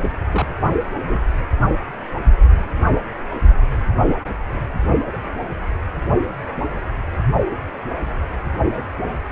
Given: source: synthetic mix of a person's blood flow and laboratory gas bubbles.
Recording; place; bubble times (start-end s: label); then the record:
Doppler ultrasound of blood flow; precordium
0.02-0.13 s: bubbles
0.31-0.47 s: bubbles
0.96-1.26 s: bubbles
5.12-5.17 s: bubbles
From the record:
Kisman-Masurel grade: 122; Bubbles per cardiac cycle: 1 to 2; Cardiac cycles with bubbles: 10 to 50%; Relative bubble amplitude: moderate (0.250 to 0.450); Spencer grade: 2 (many but less than half of the cardiac periods contain bubble signals, singularly or in groups); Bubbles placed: only in the low amplitude regions of the cardiac cycle